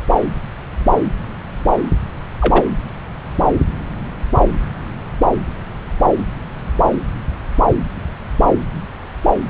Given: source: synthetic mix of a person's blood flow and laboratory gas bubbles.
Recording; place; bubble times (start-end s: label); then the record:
Doppler ultrasound of blood flow; subclavian vein
2.41-2.64 s: bubbles
From the record:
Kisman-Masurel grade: 113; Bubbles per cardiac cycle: 1 to 2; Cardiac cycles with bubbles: 1 to 10%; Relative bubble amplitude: loud (0.450 to 0.775); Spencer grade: 1 (occasional bubble signal discernible with the cardiac motion signal, with majority of cardiac periods free of bubbles); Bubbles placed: anywhere in the cardiac cycle